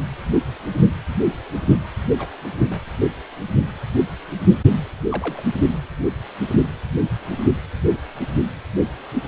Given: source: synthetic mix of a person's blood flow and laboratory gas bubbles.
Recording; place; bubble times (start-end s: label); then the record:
Doppler ultrasound of blood flow; precordium
2.18-2.29 s: bubbles
2.69-2.80 s: bubbles
5.11-5.43 s: bubbles
From the record:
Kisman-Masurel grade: 121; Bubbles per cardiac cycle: 1 to 2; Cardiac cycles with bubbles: 10 to 50%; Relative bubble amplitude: barely perceptible (0.100 to 0.250); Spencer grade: 2 (many but less than half of the cardiac periods contain bubble signals, singularly or in groups); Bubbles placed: anywhere in the cardiac cycle